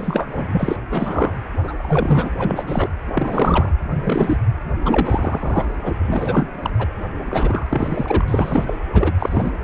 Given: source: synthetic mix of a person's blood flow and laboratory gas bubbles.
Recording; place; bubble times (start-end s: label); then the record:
Doppler ultrasound of blood flow; precordium
0.00-0.77 s: bubbles
0.90-1.34 s: bubbles
1.63-1.74 s: bubbles
1.78-2.31 s: bubbles
2.36-2.93 s: bubbles
3.12-3.70 s: bubbles
3.90-4.38 s: bubbles
4.80-5.65 s: bubbles
5.85-5.92 s: bubbles
6.01-6.46 s: bubbles
6.62-6.71 s: bubbles
6.79-6.88 s: bubbles
7.26-7.66 s: bubbles
7.69-8.79 s: bubbles
8.92-9.14 s: bubbles
9.19-9.51 s: bubbles
From the record:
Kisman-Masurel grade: 343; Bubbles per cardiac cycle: rolling drumbeat, 9 or more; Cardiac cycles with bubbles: 100%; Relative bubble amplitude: loud (0.450 to 0.775); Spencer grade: 3 (all of the cardiac periods contain showers or single bubble signals, but not dominating or overriding the cardiac motion signals); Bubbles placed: anywhere in the cardiac cycle